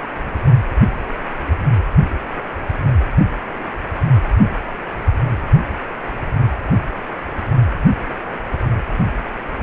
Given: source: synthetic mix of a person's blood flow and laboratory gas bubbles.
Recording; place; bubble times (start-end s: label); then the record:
Doppler ultrasound of blood flow; precordium
no bubbles
From the record:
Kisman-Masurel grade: 000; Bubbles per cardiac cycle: 0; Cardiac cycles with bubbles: 0%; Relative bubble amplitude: no bubbles discernible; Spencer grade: 0 (complete lack of bubble signals)